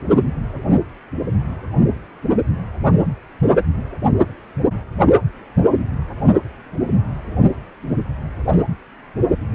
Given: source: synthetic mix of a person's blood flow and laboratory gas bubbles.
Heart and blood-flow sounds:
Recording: Doppler ultrasound of blood flow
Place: precordium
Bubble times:
9.53-9.55 s: bubbles
From the record:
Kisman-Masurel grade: 111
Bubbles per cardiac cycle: 1 to 2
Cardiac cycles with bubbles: 1 to 10%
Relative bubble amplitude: barely perceptible (0.100 to 0.250)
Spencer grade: 1 (occasional bubble signal discernible with the cardiac motion signal, with majority of cardiac periods free of bubbles)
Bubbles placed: only in the low amplitude regions of the cardiac cycle

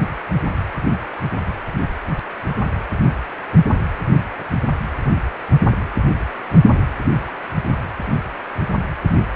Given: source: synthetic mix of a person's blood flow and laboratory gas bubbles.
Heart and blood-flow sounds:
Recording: Doppler ultrasound of blood flow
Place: precordium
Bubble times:
no bubbles
From the record:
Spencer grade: 0 (complete lack of bubble signals)

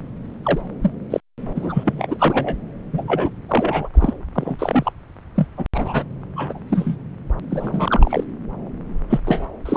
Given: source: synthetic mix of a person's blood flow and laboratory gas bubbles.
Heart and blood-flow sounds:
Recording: Doppler ultrasound of blood flow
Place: subclavian vein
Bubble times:
0.43-0.61 s: bubbles
0.82-0.91 s: bubbles
1.10-1.20 s: bubbles
1.56-2.56 s: bubbles
2.92-3.29 s: bubbles
3.48-3.89 s: bubbles
3.94-4.14 s: bubbles
4.36-4.56 s: bubbles
4.58-4.92 s: bubbles
5.36-5.46 s: bubbles
5.58-5.66 s: bubbles
5.74-6.03 s: bubbles
6.35-6.60 s: bubbles
6.69-6.96 s: bubbles
7.50-8.23 s: bubbles
9.09-9.20 s: bubbles
9.25-9.46 s: bubbles
9.65-9.77 s: bubbles
From the record:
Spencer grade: 3 (all of the cardiac periods contain showers or single bubble signals, but not dominating or overriding the cardiac motion signals)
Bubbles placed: anywhere in the cardiac cycle

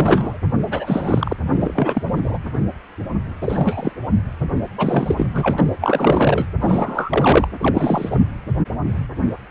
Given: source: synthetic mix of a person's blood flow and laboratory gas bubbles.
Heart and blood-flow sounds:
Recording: Doppler ultrasound of blood flow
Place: precordium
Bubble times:
0.00-0.38 s: bubbles
0.67-1.36 s: bubbles
1.46-2.03 s: bubbles
2.16-2.21 s: bubbles
2.23-2.38 s: bubbles
3.41-3.92 s: bubbles
4.78-5.26 s: bubbles
5.34-5.66 s: bubbles
5.81-6.46 s: bubbles
6.61-7.47 s: bubbles
7.58-8.25 s: bubbles
From the record:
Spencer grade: 3 (all of the cardiac periods contain showers or single bubble signals, but not dominating or overriding the cardiac motion signals)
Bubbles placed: anywhere in the cardiac cycle

